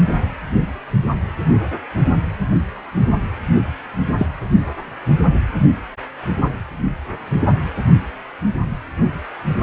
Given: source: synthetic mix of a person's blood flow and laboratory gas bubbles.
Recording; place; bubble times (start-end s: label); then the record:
Doppler ultrasound of blood flow; precordium
4.17-4.26 s: bubbles
From the record:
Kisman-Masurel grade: 123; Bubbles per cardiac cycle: 1 to 2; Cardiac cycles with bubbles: 10 to 50%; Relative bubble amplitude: loud (0.450 to 0.775); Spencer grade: 2 (many but less than half of the cardiac periods contain bubble signals, singularly or in groups); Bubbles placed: only in the low amplitude regions of the cardiac cycle